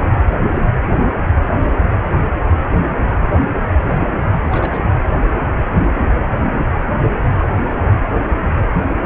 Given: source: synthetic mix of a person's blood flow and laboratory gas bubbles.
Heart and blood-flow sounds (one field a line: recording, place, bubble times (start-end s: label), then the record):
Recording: Doppler ultrasound of blood flow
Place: precordium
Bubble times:
4.41-4.84 s: bubbles
From the record:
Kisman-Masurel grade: 211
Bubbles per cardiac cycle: several, 3 to 8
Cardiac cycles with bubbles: 1 to 10%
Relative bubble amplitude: barely perceptible (0.100 to 0.250)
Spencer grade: 1 (occasional bubble signal discernible with the cardiac motion signal, with majority of cardiac periods free of bubbles)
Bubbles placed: anywhere in the cardiac cycle